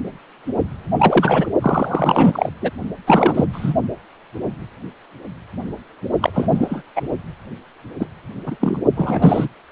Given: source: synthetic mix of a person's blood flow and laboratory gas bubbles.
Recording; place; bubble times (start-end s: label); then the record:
Doppler ultrasound of blood flow; precordium
0.99-1.47 s: bubbles
1.60-2.50 s: bubbles
2.62-2.70 s: bubbles
3.06-3.45 s: bubbles
3.52-3.73 s: bubbles
6.21-6.82 s: bubbles
6.95-7.01 s: bubbles
7.99-8.07 s: bubbles
8.46-8.56 s: bubbles
8.60-8.80 s: bubbles
8.96-9.48 s: bubbles
From the record:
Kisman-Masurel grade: 233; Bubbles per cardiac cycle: several, 3 to 8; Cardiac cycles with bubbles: 50 to 99%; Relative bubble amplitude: loud (0.450 to 0.775); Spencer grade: 3 (all of the cardiac periods contain showers or single bubble signals, but not dominating or overriding the cardiac motion signals); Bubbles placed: only in the low amplitude regions of the cardiac cycle